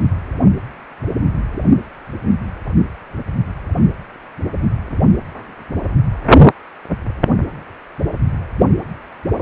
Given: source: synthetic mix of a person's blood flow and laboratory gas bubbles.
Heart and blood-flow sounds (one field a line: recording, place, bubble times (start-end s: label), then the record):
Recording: Doppler ultrasound of blood flow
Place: precordium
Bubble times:
no bubbles
From the record:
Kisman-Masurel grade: 000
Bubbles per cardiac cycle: 0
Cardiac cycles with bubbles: 0%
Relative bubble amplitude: no bubbles discernible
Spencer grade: 0 (complete lack of bubble signals)